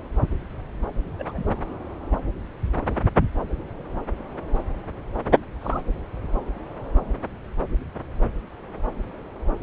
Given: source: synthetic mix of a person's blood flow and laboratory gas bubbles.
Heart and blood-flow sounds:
Doppler ultrasound of blood flow; subclavian vein
1.19-1.48 s: bubbles
5.61-5.81 s: bubbles
From the record:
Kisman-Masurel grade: 111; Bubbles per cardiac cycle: 1 to 2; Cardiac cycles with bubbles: 1 to 10%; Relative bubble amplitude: barely perceptible (0.100 to 0.250); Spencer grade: 1 (occasional bubble signal discernible with the cardiac motion signal, with majority of cardiac periods free of bubbles); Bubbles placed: anywhere in the cardiac cycle

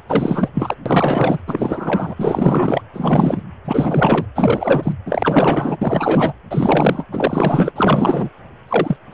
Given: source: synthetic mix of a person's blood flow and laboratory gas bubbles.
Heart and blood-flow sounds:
Doppler ultrasound of blood flow; precordium
0.08-0.49 s: bubbles
0.54-0.75 s: bubbles
0.85-1.41 s: bubbles
1.47-2.15 s: bubbles
2.19-2.81 s: bubbles
2.94-3.42 s: bubbles
3.65-4.26 s: bubbles
4.35-4.92 s: bubbles
5.05-5.76 s: bubbles
5.81-6.33 s: bubbles
6.50-7.04 s: bubbles
7.12-7.72 s: bubbles
7.75-8.29 s: bubbles
8.67-8.96 s: bubbles
9.11-9.14 s: bubbles
From the record:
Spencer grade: 4 (maximum detectable bubble signal sounding continuously throughout systole and diastole of every cardiac period, and overriding the amplitude of the normal cardiac signals); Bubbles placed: anywhere in the cardiac cycle

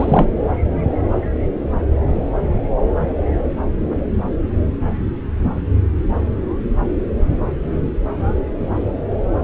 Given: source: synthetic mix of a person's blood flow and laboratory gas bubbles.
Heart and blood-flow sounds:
Doppler ultrasound of blood flow; subclavian vein
0.00-0.28 s: bubbles
From the record:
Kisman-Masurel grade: 223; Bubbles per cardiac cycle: several, 3 to 8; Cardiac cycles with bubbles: 10 to 50%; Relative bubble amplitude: loud (0.450 to 0.775); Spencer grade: 2 (many but less than half of the cardiac periods contain bubble signals, singularly or in groups); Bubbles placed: anywhere in the cardiac cycle

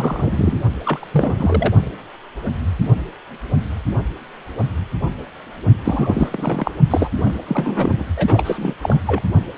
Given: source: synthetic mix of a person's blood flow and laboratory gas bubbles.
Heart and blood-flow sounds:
Doppler ultrasound of blood flow; precordium
0.00-0.58 s: bubbles
0.83-1.06 s: bubbles
1.12-1.74 s: bubbles
5.84-6.29 s: bubbles
6.31-6.71 s: bubbles
6.90-7.08 s: bubbles
7.17-7.33 s: bubbles
7.47-8.03 s: bubbles
8.17-8.74 s: bubbles
8.83-9.01 s: bubbles
9.07-9.21 s: bubbles
From the record:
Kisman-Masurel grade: 332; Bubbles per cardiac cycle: rolling drumbeat, 9 or more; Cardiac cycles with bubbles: 50 to 99%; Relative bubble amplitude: moderate (0.250 to 0.450); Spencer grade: 3 (all of the cardiac periods contain showers or single bubble signals, but not dominating or overriding the cardiac motion signals); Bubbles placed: only in the low amplitude regions of the cardiac cycle

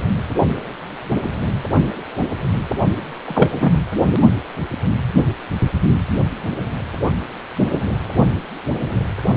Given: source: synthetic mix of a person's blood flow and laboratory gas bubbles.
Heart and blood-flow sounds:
Doppler ultrasound of blood flow; precordium
3.25-3.72 s: bubbles
From the record:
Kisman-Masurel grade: 223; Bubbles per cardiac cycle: several, 3 to 8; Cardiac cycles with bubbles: 10 to 50%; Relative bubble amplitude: loud (0.450 to 0.775); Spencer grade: 2 (many but less than half of the cardiac periods contain bubble signals, singularly or in groups); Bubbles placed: only in the low amplitude regions of the cardiac cycle

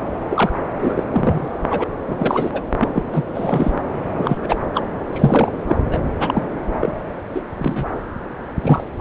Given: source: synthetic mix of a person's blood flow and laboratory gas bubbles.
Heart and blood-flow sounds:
Doppler ultrasound of blood flow; subclavian vein
0.29-0.52 s: bubbles
0.79-1.03 s: bubbles
1.14-1.48 s: bubbles
1.71-1.84 s: bubbles
2.06-2.63 s: bubbles
2.79-3.02 s: bubbles
3.12-3.25 s: bubbles
3.33-3.71 s: bubbles
4.17-4.56 s: bubbles
4.74-4.83 s: bubbles
5.12-5.52 s: bubbles
5.67-5.76 s: bubbles
5.91-6.02 s: bubbles
6.20-6.49 s: bubbles
6.80-6.95 s: bubbles
7.34-7.42 s: bubbles
7.56-7.85 s: bubbles
8.61-8.86 s: bubbles
From the record:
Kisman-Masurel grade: 243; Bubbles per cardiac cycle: several, 3 to 8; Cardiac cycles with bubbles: 100%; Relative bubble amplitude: loud (0.450 to 0.775); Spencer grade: 3 (all of the cardiac periods contain showers or single bubble signals, but not dominating or overriding the cardiac motion signals); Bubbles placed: anywhere in the cardiac cycle

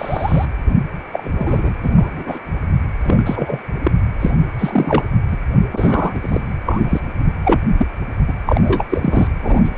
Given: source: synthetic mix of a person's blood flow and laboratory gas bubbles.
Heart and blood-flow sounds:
Doppler ultrasound of blood flow; precordium
0.00-0.45 s: bubbles
1.12-1.76 s: bubbles
1.83-1.90 s: bubbles
1.96-2.38 s: bubbles
3.03-3.59 s: bubbles
3.84-3.91 s: bubbles
4.20-4.31 s: bubbles
4.58-5.03 s: bubbles
5.30-5.38 s: bubbles
5.72-6.42 s: bubbles
6.65-7.00 s: bubbles
7.44-7.59 s: bubbles
7.78-7.88 s: bubbles
8.28-8.32 s: bubbles
8.46-8.83 s: bubbles
8.89-9.28 s: bubbles
9.42-9.71 s: bubbles
9.75-9.78 s: bubbles
From the record:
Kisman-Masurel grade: 243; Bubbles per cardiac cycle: several, 3 to 8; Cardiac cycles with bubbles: 100%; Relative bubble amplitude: loud (0.450 to 0.775); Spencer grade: 3 (all of the cardiac periods contain showers or single bubble signals, but not dominating or overriding the cardiac motion signals); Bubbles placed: anywhere in the cardiac cycle

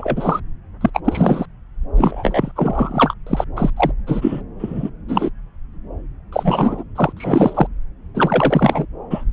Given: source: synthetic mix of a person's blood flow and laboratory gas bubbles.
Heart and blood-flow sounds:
Doppler ultrasound of blood flow; subclavian vein
0.00-0.40 s: bubbles
0.80-0.90 s: bubbles
0.94-1.00 s: bubbles
1.04-1.46 s: bubbles
1.96-2.52 s: bubbles
2.56-3.14 s: bubbles
3.27-3.44 s: bubbles
3.56-3.70 s: bubbles
3.76-3.92 s: bubbles
4.07-4.41 s: bubbles
4.58-4.90 s: bubbles
5.08-5.29 s: bubbles
6.32-6.83 s: bubbles
6.95-7.12 s: bubbles
7.17-7.67 s: bubbles
8.14-8.85 s: bubbles
9.10-9.23 s: bubbles
From the record:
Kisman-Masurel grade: 243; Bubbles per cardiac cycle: several, 3 to 8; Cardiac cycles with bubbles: 100%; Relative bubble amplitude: loud (0.450 to 0.775); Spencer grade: 3 (all of the cardiac periods contain showers or single bubble signals, but not dominating or overriding the cardiac motion signals); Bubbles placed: anywhere in the cardiac cycle

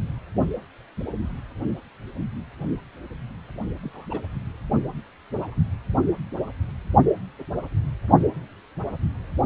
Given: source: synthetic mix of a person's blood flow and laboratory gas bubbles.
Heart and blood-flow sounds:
Doppler ultrasound of blood flow; precordium
3.83-4.06 s: bubbles
4.10-4.21 s: bubbles
5.37-5.55 s: bubbles
From the record:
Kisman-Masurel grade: 121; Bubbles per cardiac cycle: 1 to 2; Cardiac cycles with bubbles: 10 to 50%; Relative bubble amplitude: barely perceptible (0.100 to 0.250); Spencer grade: 2 (many but less than half of the cardiac periods contain bubble signals, singularly or in groups); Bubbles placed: anywhere in the cardiac cycle

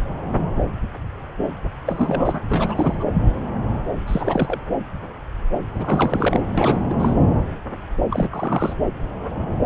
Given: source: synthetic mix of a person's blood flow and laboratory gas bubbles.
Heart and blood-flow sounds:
Doppler ultrasound of blood flow; subclavian vein
1.85-2.42 s: bubbles
2.48-3.04 s: bubbles
4.07-4.60 s: bubbles
5.74-6.41 s: bubbles
6.58-6.86 s: bubbles
6.89-6.94 s: bubbles
6.99-7.14 s: bubbles
8.10-8.29 s: bubbles
8.31-8.73 s: bubbles
From the record:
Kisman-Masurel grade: 332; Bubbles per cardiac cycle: rolling drumbeat, 9 or more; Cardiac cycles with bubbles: 50 to 99%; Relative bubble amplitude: moderate (0.250 to 0.450); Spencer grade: 3 (all of the cardiac periods contain showers or single bubble signals, but not dominating or overriding the cardiac motion signals); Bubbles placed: anywhere in the cardiac cycle

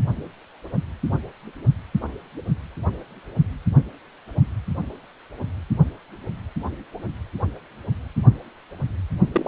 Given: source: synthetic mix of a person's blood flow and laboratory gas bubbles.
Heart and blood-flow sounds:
Doppler ultrasound of blood flow; precordium
9.32-9.48 s: bubbles
From the record:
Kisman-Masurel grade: 112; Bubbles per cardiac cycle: 1 to 2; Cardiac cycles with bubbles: 1 to 10%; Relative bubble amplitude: moderate (0.250 to 0.450); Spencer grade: 1 (occasional bubble signal discernible with the cardiac motion signal, with majority of cardiac periods free of bubbles); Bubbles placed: only in the low amplitude regions of the cardiac cycle

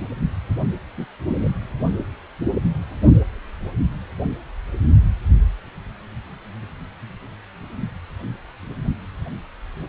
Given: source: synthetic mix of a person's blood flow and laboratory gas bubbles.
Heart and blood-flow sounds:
Doppler ultrasound of blood flow; precordium
0.97-1.06 s: bubbles
1.27-1.49 s: bubbles
From the record:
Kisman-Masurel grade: 122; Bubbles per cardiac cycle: 1 to 2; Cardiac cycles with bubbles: 10 to 50%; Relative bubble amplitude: moderate (0.250 to 0.450); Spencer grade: 2 (many but less than half of the cardiac periods contain bubble signals, singularly or in groups); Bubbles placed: only in the low amplitude regions of the cardiac cycle

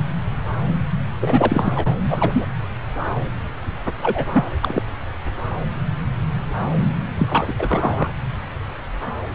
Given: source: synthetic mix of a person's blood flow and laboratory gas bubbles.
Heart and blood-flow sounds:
Doppler ultrasound of blood flow; subclavian vein
1.21-1.87 s: bubbles
2.09-2.46 s: bubbles
4.02-4.29 s: bubbles
4.33-4.45 s: bubbles
4.61-4.82 s: bubbles
7.16-7.54 s: bubbles
7.58-8.12 s: bubbles
From the record:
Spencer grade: 2 (many but less than half of the cardiac periods contain bubble signals, singularly or in groups); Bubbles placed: anywhere in the cardiac cycle

